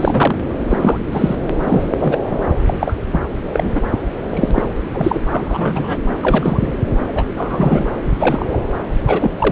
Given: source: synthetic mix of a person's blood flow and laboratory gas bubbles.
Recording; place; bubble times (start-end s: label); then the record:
Doppler ultrasound of blood flow; subclavian vein
0.00-0.39 s: bubbles
0.70-0.98 s: bubbles
1.12-1.35 s: bubbles
1.59-1.91 s: bubbles
1.99-2.18 s: bubbles
2.29-2.40 s: bubbles
2.67-2.74 s: bubbles
2.79-2.96 s: bubbles
3.12-3.21 s: bubbles
3.53-3.88 s: bubbles
3.91-3.98 s: bubbles
4.29-4.51 s: bubbles
4.54-4.62 s: bubbles
4.93-5.21 s: bubbles
5.30-5.96 s: bubbles
6.22-6.72 s: bubbles
7.15-7.23 s: bubbles
7.37-7.85 s: bubbles
8.20-8.59 s: bubbles
9.06-9.52 s: bubbles
From the record:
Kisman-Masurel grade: 233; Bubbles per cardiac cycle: several, 3 to 8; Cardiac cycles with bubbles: 50 to 99%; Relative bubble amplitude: loud (0.450 to 0.775); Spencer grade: 3 (all of the cardiac periods contain showers or single bubble signals, but not dominating or overriding the cardiac motion signals); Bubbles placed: anywhere in the cardiac cycle